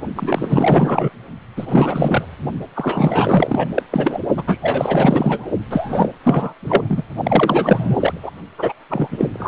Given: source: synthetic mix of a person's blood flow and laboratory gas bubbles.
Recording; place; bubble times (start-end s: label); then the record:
Doppler ultrasound of blood flow; precordium
0.15-1.10 s: bubbles
1.56-2.26 s: bubbles
2.75-3.69 s: bubbles
3.75-3.83 s: bubbles
3.92-4.21 s: bubbles
4.37-4.44 s: bubbles
4.47-4.58 s: bubbles
4.62-5.48 s: bubbles
5.71-6.10 s: bubbles
6.23-6.53 s: bubbles
6.64-7.03 s: bubbles
7.23-8.18 s: bubbles
8.22-8.30 s: bubbles
8.58-8.72 s: bubbles
8.89-9.29 s: bubbles
9.33-9.48 s: bubbles
From the record:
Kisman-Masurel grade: 444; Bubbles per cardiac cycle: continuous sound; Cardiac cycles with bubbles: 100%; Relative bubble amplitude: maximal (0.775 to 0.999); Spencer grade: 4 (maximum detectable bubble signal sounding continuously throughout systole and diastole of every cardiac period, and overriding the amplitude of the normal cardiac signals); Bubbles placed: only in the low amplitude regions of the cardiac cycle